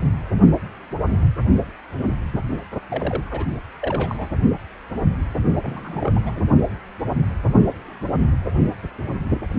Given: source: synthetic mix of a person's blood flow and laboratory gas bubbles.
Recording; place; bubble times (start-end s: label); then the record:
Doppler ultrasound of blood flow; precordium
2.90-3.46 s: bubbles
3.81-4.30 s: bubbles
5.62-6.12 s: bubbles
6.14-6.19 s: bubbles
6.25-6.42 s: bubbles
From the record:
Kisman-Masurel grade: 221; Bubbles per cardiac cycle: several, 3 to 8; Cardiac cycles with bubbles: 10 to 50%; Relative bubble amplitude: barely perceptible (0.100 to 0.250); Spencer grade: 2 (many but less than half of the cardiac periods contain bubble signals, singularly or in groups); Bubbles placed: only in the low amplitude regions of the cardiac cycle